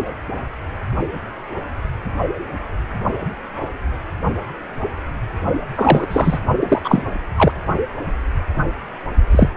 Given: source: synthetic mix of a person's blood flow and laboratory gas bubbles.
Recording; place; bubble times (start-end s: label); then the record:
Doppler ultrasound of blood flow; precordium
5.76-6.06 s: bubbles
6.09-6.39 s: bubbles
6.60-7.02 s: bubbles
7.36-7.52 s: bubbles
9.31-9.48 s: bubbles
From the record:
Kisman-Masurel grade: 223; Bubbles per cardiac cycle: several, 3 to 8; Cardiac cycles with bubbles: 10 to 50%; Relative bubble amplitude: loud (0.450 to 0.775); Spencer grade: 2 (many but less than half of the cardiac periods contain bubble signals, singularly or in groups); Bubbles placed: only in the low amplitude regions of the cardiac cycle